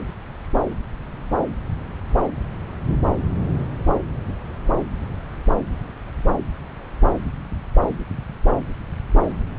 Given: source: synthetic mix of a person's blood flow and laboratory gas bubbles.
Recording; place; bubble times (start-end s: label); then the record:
Doppler ultrasound of blood flow; subclavian vein
no bubbles
From the record:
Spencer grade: 0 (complete lack of bubble signals)